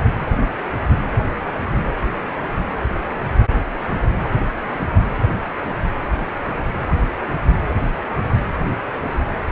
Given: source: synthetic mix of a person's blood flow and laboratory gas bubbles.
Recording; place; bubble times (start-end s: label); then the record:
Doppler ultrasound of blood flow; precordium
6.93-7.08 s: bubbles
From the record:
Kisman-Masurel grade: 111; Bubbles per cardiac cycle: 1 to 2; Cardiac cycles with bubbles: 1 to 10%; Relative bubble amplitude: barely perceptible (0.100 to 0.250); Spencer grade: 1 (occasional bubble signal discernible with the cardiac motion signal, with majority of cardiac periods free of bubbles); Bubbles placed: anywhere in the cardiac cycle